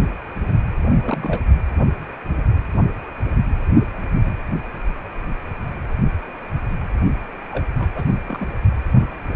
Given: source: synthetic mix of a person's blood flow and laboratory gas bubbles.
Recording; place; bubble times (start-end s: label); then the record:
Doppler ultrasound of blood flow; precordium
0.89-1.41 s: bubbles
7.51-7.65 s: bubbles
7.78-7.90 s: bubbles
7.95-8.04 s: bubbles
8.28-8.47 s: bubbles
From the record:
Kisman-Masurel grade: 221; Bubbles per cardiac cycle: several, 3 to 8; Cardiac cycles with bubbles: 10 to 50%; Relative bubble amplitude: barely perceptible (0.100 to 0.250); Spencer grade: 2 (many but less than half of the cardiac periods contain bubble signals, singularly or in groups); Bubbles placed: only in the low amplitude regions of the cardiac cycle